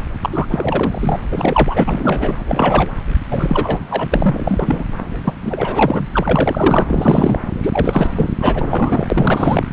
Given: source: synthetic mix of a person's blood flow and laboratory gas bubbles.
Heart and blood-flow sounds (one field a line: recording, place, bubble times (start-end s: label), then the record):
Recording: Doppler ultrasound of blood flow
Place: subclavian vein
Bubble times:
0.21-0.47 s: bubbles
0.50-1.19 s: bubbles
1.31-1.84 s: bubbles
1.86-2.37 s: bubbles
2.48-2.89 s: bubbles
3.30-3.79 s: bubbles
3.90-4.85 s: bubbles
5.24-5.33 s: bubbles
5.45-6.06 s: bubbles
6.12-6.83 s: bubbles
6.87-7.39 s: bubbles
7.62-8.08 s: bubbles
8.15-8.30 s: bubbles
8.40-9.07 s: bubbles
9.10-9.65 s: bubbles
From the record:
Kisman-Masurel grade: 343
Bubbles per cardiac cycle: rolling drumbeat, 9 or more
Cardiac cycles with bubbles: 100%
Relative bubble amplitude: loud (0.450 to 0.775)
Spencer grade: 3 (all of the cardiac periods contain showers or single bubble signals, but not dominating or overriding the cardiac motion signals)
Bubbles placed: anywhere in the cardiac cycle